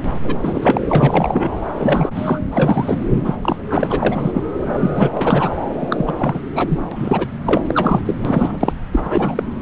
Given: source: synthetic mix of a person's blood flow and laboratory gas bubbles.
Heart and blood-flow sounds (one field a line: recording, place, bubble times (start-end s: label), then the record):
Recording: Doppler ultrasound of blood flow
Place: subclavian vein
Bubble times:
0.23-0.82 s: bubbles
0.89-1.49 s: bubbles
1.75-2.09 s: bubbles
2.15-2.40 s: bubbles
2.52-3.00 s: bubbles
3.25-3.35 s: bubbles
3.42-3.56 s: bubbles
3.69-4.44 s: bubbles
4.72-5.10 s: bubbles
5.13-5.54 s: bubbles
5.79-6.41 s: bubbles
6.55-6.79 s: bubbles
6.91-7.27 s: bubbles
7.46-7.62 s: bubbles
7.68-8.01 s: bubbles
8.06-8.16 s: bubbles
8.25-8.58 s: bubbles
8.60-8.74 s: bubbles
8.92-9.43 s: bubbles
From the record:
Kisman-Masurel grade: 333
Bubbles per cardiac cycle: rolling drumbeat, 9 or more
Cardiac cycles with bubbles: 50 to 99%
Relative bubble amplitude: loud (0.450 to 0.775)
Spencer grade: 3 (all of the cardiac periods contain showers or single bubble signals, but not dominating or overriding the cardiac motion signals)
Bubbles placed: anywhere in the cardiac cycle